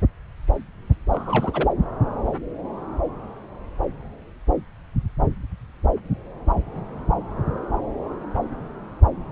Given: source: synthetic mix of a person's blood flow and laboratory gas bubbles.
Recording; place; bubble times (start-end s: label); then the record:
Doppler ultrasound of blood flow; subclavian vein
1.11-1.69 s: bubbles
From the record:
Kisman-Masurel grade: 212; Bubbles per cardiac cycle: several, 3 to 8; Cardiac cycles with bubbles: 1 to 10%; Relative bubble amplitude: moderate (0.250 to 0.450); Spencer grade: 1 (occasional bubble signal discernible with the cardiac motion signal, with majority of cardiac periods free of bubbles); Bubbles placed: anywhere in the cardiac cycle